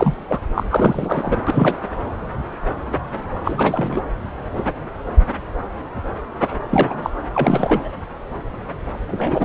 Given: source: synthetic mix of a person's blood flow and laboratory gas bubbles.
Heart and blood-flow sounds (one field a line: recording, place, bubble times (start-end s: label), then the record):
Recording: Doppler ultrasound of blood flow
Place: subclavian vein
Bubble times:
0.00-0.14 s: bubbles
0.28-0.39 s: bubbles
0.55-0.64 s: bubbles
0.68-1.40 s: bubbles
1.47-1.78 s: bubbles
3.44-4.01 s: bubbles
6.70-7.10 s: bubbles
7.34-7.88 s: bubbles
9.06-9.45 s: bubbles
From the record:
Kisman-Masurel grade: 233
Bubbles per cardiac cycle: several, 3 to 8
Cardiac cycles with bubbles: 50 to 99%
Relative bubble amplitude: loud (0.450 to 0.775)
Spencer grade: 3 (all of the cardiac periods contain showers or single bubble signals, but not dominating or overriding the cardiac motion signals)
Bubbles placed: anywhere in the cardiac cycle